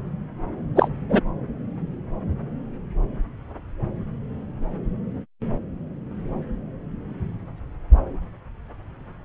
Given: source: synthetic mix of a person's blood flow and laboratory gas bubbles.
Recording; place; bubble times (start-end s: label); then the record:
Doppler ultrasound of blood flow; subclavian vein
0.76-0.90 s: bubbles
1.09-1.21 s: bubbles
From the record:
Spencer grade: 1 (occasional bubble signal discernible with the cardiac motion signal, with majority of cardiac periods free of bubbles); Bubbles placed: anywhere in the cardiac cycle